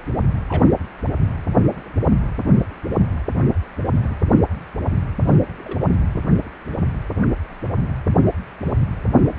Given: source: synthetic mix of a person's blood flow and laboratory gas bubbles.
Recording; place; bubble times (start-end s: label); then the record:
Doppler ultrasound of blood flow; precordium
0.48-0.70 s: bubbles
3.94-4.16 s: bubbles
5.22-5.35 s: bubbles
5.64-5.78 s: bubbles
From the record:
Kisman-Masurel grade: 121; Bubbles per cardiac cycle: 1 to 2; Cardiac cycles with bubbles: 10 to 50%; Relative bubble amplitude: barely perceptible (0.100 to 0.250); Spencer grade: 2 (many but less than half of the cardiac periods contain bubble signals, singularly or in groups); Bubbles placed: anywhere in the cardiac cycle